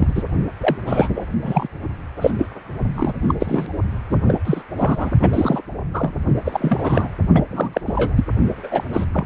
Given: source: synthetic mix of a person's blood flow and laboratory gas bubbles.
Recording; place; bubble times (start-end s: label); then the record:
Doppler ultrasound of blood flow; precordium
0.00-0.23 s: bubbles
0.61-0.77 s: bubbles
0.86-1.08 s: bubbles
1.16-1.30 s: bubbles
1.42-1.68 s: bubbles
2.21-2.31 s: bubbles
2.38-2.48 s: bubbles
2.96-3.13 s: bubbles
3.21-3.34 s: bubbles
3.40-3.66 s: bubbles
4.10-4.24 s: bubbles
4.28-4.39 s: bubbles
4.45-4.62 s: bubbles
4.79-5.10 s: bubbles
5.22-5.62 s: bubbles
5.94-6.12 s: bubbles
6.45-7.09 s: bubbles
7.33-7.46 s: bubbles
7.50-7.81 s: bubbles
7.87-8.23 s: bubbles
8.57-8.84 s: bubbles
8.93-9.04 s: bubbles
9.14-9.26 s: bubbles
From the record:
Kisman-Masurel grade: 242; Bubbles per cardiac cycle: several, 3 to 8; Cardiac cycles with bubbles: 100%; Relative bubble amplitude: moderate (0.250 to 0.450); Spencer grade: 3 (all of the cardiac periods contain showers or single bubble signals, but not dominating or overriding the cardiac motion signals); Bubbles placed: only in the low amplitude regions of the cardiac cycle